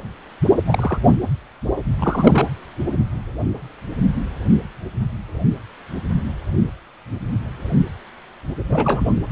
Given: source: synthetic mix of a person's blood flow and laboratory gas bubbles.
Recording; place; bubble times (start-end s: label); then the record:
Doppler ultrasound of blood flow; precordium
0.67-0.99 s: bubbles
1.05-1.15 s: bubbles
1.99-2.47 s: bubbles
8.70-9.21 s: bubbles
From the record:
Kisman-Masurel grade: 222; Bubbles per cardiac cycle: several, 3 to 8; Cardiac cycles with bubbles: 10 to 50%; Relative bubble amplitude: moderate (0.250 to 0.450); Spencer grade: 2 (many but less than half of the cardiac periods contain bubble signals, singularly or in groups); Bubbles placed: anywhere in the cardiac cycle